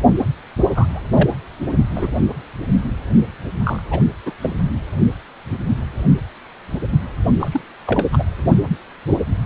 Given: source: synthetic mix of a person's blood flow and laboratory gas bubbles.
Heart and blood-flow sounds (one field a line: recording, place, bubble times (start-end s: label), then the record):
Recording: Doppler ultrasound of blood flow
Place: precordium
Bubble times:
0.72-1.00 s: bubbles
1.14-1.29 s: bubbles
1.95-2.15 s: bubbles
3.63-3.83 s: bubbles
3.91-4.05 s: bubbles
4.25-4.33 s: bubbles
4.41-4.54 s: bubbles
7.39-7.48 s: bubbles
7.51-7.61 s: bubbles
7.86-8.06 s: bubbles
8.12-8.24 s: bubbles
From the record:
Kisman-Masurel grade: 222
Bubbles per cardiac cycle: several, 3 to 8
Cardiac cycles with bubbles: 10 to 50%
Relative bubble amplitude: moderate (0.250 to 0.450)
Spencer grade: 2 (many but less than half of the cardiac periods contain bubble signals, singularly or in groups)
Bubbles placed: anywhere in the cardiac cycle